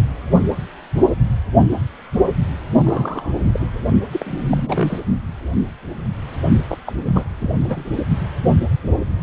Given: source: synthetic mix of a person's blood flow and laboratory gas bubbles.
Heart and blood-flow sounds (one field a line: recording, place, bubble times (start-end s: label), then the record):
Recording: Doppler ultrasound of blood flow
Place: precordium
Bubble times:
2.85-3.38 s: bubbles
3.45-3.67 s: bubbles
4.12-4.46 s: bubbles
4.50-5.00 s: bubbles
6.69-6.78 s: bubbles
6.86-6.92 s: bubbles
7.05-7.25 s: bubbles
7.38-7.50 s: bubbles
7.61-7.86 s: bubbles
From the record:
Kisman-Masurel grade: 332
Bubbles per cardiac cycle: rolling drumbeat, 9 or more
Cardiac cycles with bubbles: 50 to 99%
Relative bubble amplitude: moderate (0.250 to 0.450)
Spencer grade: 3 (all of the cardiac periods contain showers or single bubble signals, but not dominating or overriding the cardiac motion signals)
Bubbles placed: only in the low amplitude regions of the cardiac cycle